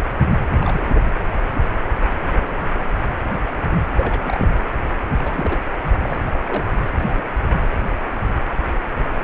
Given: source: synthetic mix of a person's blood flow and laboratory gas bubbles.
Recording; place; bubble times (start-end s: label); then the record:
Doppler ultrasound of blood flow; precordium
0.60-0.88 s: bubbles
0.94-1.12 s: bubbles
3.93-4.20 s: bubbles
4.24-4.64 s: bubbles
5.18-5.58 s: bubbles
5.97-6.23 s: bubbles
6.31-6.42 s: bubbles
6.47-6.70 s: bubbles
7.00-7.25 s: bubbles
9.22-9.24 s: bubbles
From the record:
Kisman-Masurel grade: 221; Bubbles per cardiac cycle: several, 3 to 8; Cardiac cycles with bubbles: 10 to 50%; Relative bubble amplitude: barely perceptible (0.100 to 0.250); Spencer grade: 2 (many but less than half of the cardiac periods contain bubble signals, singularly or in groups); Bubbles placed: anywhere in the cardiac cycle